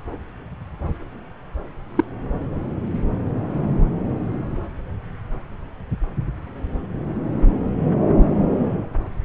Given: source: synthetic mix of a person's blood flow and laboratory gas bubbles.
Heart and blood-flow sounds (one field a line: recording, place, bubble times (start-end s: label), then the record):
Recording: Doppler ultrasound of blood flow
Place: subclavian vein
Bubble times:
1.96-2.04 s: bubbles
From the record:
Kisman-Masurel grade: 113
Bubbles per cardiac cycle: 1 to 2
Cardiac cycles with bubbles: 1 to 10%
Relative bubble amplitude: loud (0.450 to 0.775)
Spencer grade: 1 (occasional bubble signal discernible with the cardiac motion signal, with majority of cardiac periods free of bubbles)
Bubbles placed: anywhere in the cardiac cycle